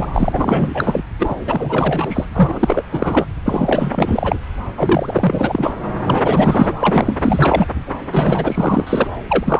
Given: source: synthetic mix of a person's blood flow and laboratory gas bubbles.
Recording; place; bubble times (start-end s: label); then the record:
Doppler ultrasound of blood flow; subclavian vein
0.00-0.07 s: bubbles
0.14-1.03 s: bubbles
1.18-1.41 s: bubbles
1.46-2.25 s: bubbles
2.34-2.83 s: bubbles
2.91-3.25 s: bubbles
3.45-4.36 s: bubbles
4.77-5.79 s: bubbles
6.06-6.74 s: bubbles
6.80-7.18 s: bubbles
7.22-7.68 s: bubbles
8.10-9.08 s: bubbles
9.29-9.60 s: bubbles
From the record:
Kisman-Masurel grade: 444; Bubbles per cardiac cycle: continuous sound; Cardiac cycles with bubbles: 100%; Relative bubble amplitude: maximal (0.775 to 0.999); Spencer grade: 4 (maximum detectable bubble signal sounding continuously throughout systole and diastole of every cardiac period, and overriding the amplitude of the normal cardiac signals); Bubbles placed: anywhere in the cardiac cycle